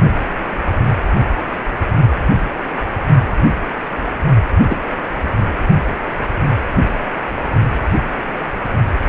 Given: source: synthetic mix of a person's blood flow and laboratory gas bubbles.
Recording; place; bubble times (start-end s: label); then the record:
Doppler ultrasound of blood flow; precordium
4.70-4.77 s: bubbles
From the record:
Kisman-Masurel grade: 113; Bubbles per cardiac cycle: 1 to 2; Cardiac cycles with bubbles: 1 to 10%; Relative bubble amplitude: loud (0.450 to 0.775); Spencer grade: 1 (occasional bubble signal discernible with the cardiac motion signal, with majority of cardiac periods free of bubbles); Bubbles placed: only in the low amplitude regions of the cardiac cycle